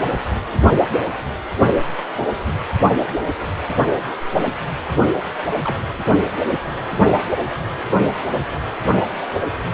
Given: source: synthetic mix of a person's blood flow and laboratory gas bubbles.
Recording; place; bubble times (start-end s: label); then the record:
Doppler ultrasound of blood flow; precordium
5.64-5.76 s: bubbles
From the record:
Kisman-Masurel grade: 121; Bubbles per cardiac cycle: 1 to 2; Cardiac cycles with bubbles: 10 to 50%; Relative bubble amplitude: barely perceptible (0.100 to 0.250); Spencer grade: 2 (many but less than half of the cardiac periods contain bubble signals, singularly or in groups); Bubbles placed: anywhere in the cardiac cycle